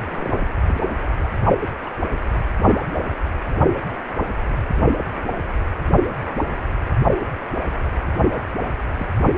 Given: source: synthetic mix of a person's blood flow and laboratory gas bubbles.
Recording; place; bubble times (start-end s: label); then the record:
Doppler ultrasound of blood flow; precordium
0.08-0.38 s: bubbles
0.67-0.81 s: bubbles
1.84-1.90 s: bubbles
8.96-9.07 s: bubbles
From the record:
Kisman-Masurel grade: 121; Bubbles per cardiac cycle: 1 to 2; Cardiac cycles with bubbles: 10 to 50%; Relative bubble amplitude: barely perceptible (0.100 to 0.250); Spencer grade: 2 (many but less than half of the cardiac periods contain bubble signals, singularly or in groups); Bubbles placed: only in the low amplitude regions of the cardiac cycle